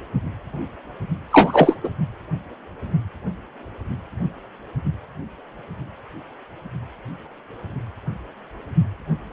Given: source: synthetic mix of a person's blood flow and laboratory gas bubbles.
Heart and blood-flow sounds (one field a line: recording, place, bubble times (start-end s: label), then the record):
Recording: Doppler ultrasound of blood flow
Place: precordium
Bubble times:
1.31-1.76 s: bubbles
1.83-1.90 s: bubbles
From the record:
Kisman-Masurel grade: 223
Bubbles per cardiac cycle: several, 3 to 8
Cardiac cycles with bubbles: 10 to 50%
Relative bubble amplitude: loud (0.450 to 0.775)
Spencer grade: 2 (many but less than half of the cardiac periods contain bubble signals, singularly or in groups)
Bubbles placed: only in the low amplitude regions of the cardiac cycle